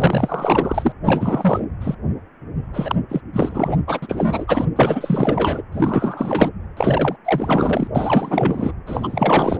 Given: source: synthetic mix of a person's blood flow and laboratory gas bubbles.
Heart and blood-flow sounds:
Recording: Doppler ultrasound of blood flow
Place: precordium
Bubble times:
0.00-0.92 s: bubbles
1.04-1.66 s: bubbles
1.80-1.95 s: bubbles
2.74-2.96 s: bubbles
3.09-3.21 s: bubbles
3.33-3.80 s: bubbles
3.87-4.65 s: bubbles
4.75-5.62 s: bubbles
5.72-6.50 s: bubbles
6.77-7.17 s: bubbles
7.25-7.88 s: bubbles
7.95-8.72 s: bubbles
8.87-9.57 s: bubbles
From the record:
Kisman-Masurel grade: 444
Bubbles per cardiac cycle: continuous sound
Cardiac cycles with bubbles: 100%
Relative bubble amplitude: maximal (0.775 to 0.999)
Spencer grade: 4 (maximum detectable bubble signal sounding continuously throughout systole and diastole of every cardiac period, and overriding the amplitude of the normal cardiac signals)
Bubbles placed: anywhere in the cardiac cycle

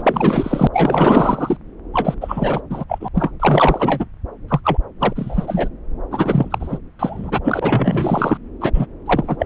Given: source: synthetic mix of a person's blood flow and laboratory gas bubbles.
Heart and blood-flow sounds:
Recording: Doppler ultrasound of blood flow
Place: subclavian vein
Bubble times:
0.00-0.68 s: bubbles
0.73-1.57 s: bubbles
1.93-2.15 s: bubbles
2.21-2.61 s: bubbles
2.70-2.85 s: bubbles
2.88-3.08 s: bubbles
3.14-3.31 s: bubbles
3.40-4.05 s: bubbles
4.48-4.60 s: bubbles
4.63-4.77 s: bubbles
5.00-5.68 s: bubbles
6.10-6.79 s: bubbles
6.99-7.40 s: bubbles
7.44-8.38 s: bubbles
8.61-8.71 s: bubbles
8.74-8.87 s: bubbles
9.05-9.46 s: bubbles
From the record:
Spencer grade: 4 (maximum detectable bubble signal sounding continuously throughout systole and diastole of every cardiac period, and overriding the amplitude of the normal cardiac signals)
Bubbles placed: anywhere in the cardiac cycle

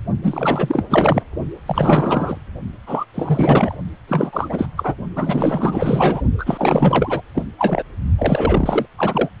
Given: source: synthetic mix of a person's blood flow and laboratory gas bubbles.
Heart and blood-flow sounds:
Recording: Doppler ultrasound of blood flow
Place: precordium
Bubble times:
0.22-0.83 s: bubbles
0.90-1.23 s: bubbles
1.66-2.38 s: bubbles
2.87-3.05 s: bubbles
3.14-3.77 s: bubbles
4.08-4.67 s: bubbles
4.76-4.95 s: bubbles
5.15-6.21 s: bubbles
6.38-7.21 s: bubbles
7.34-7.48 s: bubbles
7.58-7.83 s: bubbles
8.17-8.86 s: bubbles
8.97-9.29 s: bubbles
From the record:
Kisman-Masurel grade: 444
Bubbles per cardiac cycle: continuous sound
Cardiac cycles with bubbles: 100%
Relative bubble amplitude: maximal (0.775 to 0.999)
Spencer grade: 4 (maximum detectable bubble signal sounding continuously throughout systole and diastole of every cardiac period, and overriding the amplitude of the normal cardiac signals)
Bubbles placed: only in the low amplitude regions of the cardiac cycle

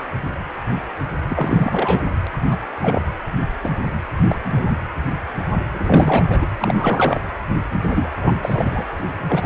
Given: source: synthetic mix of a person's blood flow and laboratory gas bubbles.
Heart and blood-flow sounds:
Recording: Doppler ultrasound of blood flow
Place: precordium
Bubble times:
0.00-0.03 s: bubbles
1.29-2.04 s: bubbles
2.24-2.27 s: bubbles
2.51-2.57 s: bubbles
2.82-3.02 s: bubbles
3.63-3.70 s: bubbles
4.29-4.39 s: bubbles
4.43-4.76 s: bubbles
5.74-6.50 s: bubbles
6.60-7.21 s: bubbles
7.88-8.09 s: bubbles
8.15-8.32 s: bubbles
8.42-8.85 s: bubbles
9.26-9.46 s: bubbles
From the record:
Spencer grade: 3 (all of the cardiac periods contain showers or single bubble signals, but not dominating or overriding the cardiac motion signals)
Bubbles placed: anywhere in the cardiac cycle

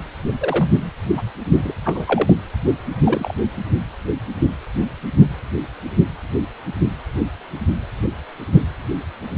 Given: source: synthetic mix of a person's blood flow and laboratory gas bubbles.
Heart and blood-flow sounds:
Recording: Doppler ultrasound of blood flow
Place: precordium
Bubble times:
0.40-0.90 s: bubbles
1.17-1.22 s: bubbles
1.56-1.73 s: bubbles
1.84-2.33 s: bubbles
3.05-3.33 s: bubbles
From the record:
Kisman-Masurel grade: 122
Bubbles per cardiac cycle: 1 to 2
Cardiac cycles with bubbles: 10 to 50%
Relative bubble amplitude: moderate (0.250 to 0.450)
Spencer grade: 2 (many but less than half of the cardiac periods contain bubble signals, singularly or in groups)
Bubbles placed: anywhere in the cardiac cycle

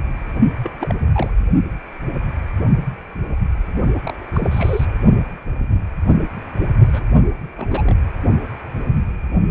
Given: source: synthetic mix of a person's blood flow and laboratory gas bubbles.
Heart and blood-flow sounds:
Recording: Doppler ultrasound of blood flow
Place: precordium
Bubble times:
0.64-0.71 s: bubbles
0.79-1.00 s: bubbles
1.12-1.38 s: bubbles
3.97-4.15 s: bubbles
4.18-4.28 s: bubbles
4.33-4.85 s: bubbles
6.92-7.11 s: bubbles
7.56-7.94 s: bubbles
From the record:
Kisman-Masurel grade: 221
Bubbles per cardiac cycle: several, 3 to 8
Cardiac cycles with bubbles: 10 to 50%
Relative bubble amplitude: barely perceptible (0.100 to 0.250)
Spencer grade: 2 (many but less than half of the cardiac periods contain bubble signals, singularly or in groups)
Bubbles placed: only in the low amplitude regions of the cardiac cycle

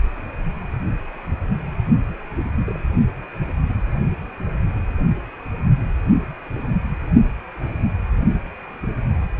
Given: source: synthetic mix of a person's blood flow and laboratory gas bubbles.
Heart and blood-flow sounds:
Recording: Doppler ultrasound of blood flow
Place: precordium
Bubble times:
2.67-2.77 s: bubbles
3.42-3.52 s: bubbles
3.68-3.74 s: bubbles
7.57-7.72 s: bubbles
From the record:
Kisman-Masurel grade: 121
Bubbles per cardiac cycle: 1 to 2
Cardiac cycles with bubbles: 10 to 50%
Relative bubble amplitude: barely perceptible (0.100 to 0.250)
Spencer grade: 2 (many but less than half of the cardiac periods contain bubble signals, singularly or in groups)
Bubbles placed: only in the low amplitude regions of the cardiac cycle

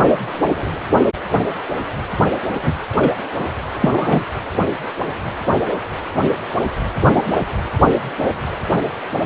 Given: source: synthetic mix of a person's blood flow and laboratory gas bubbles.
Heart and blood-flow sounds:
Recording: Doppler ultrasound of blood flow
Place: precordium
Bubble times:
2.62-2.72 s: bubbles
2.98-3.16 s: bubbles
3.79-4.24 s: bubbles
7.13-7.40 s: bubbles
From the record:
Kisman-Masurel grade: 123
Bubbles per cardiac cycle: 1 to 2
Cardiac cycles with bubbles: 10 to 50%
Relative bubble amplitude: loud (0.450 to 0.775)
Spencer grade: 2 (many but less than half of the cardiac periods contain bubble signals, singularly or in groups)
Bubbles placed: only in the low amplitude regions of the cardiac cycle

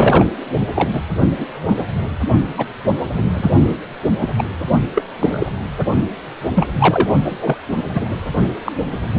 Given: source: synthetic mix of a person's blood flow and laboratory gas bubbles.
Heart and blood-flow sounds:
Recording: Doppler ultrasound of blood flow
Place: precordium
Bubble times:
0.00-0.25 s: bubbles
0.75-1.01 s: bubbles
1.37-1.46 s: bubbles
1.67-1.83 s: bubbles
2.58-2.66 s: bubbles
3.01-3.26 s: bubbles
3.33-3.51 s: bubbles
3.69-3.77 s: bubbles
4.21-4.27 s: bubbles
4.38-4.44 s: bubbles
4.95-5.02 s: bubbles
5.19-5.52 s: bubbles
6.55-6.69 s: bubbles
6.79-7.07 s: bubbles
7.25-7.58 s: bubbles
7.94-8.17 s: bubbles
8.64-8.72 s: bubbles
9.04-9.19 s: bubbles
From the record:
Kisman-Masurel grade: 243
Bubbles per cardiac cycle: several, 3 to 8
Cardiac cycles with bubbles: 100%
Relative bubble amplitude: loud (0.450 to 0.775)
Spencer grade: 3 (all of the cardiac periods contain showers or single bubble signals, but not dominating or overriding the cardiac motion signals)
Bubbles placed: only in the low amplitude regions of the cardiac cycle

